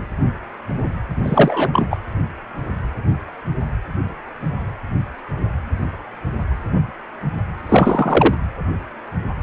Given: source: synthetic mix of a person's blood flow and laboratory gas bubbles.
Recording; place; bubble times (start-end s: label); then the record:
Doppler ultrasound of blood flow; precordium
1.23-1.98 s: bubbles
7.69-8.35 s: bubbles
From the record:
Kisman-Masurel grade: 223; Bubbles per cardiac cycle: several, 3 to 8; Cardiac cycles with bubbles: 10 to 50%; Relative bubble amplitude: loud (0.450 to 0.775); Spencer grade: 2 (many but less than half of the cardiac periods contain bubble signals, singularly or in groups); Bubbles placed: anywhere in the cardiac cycle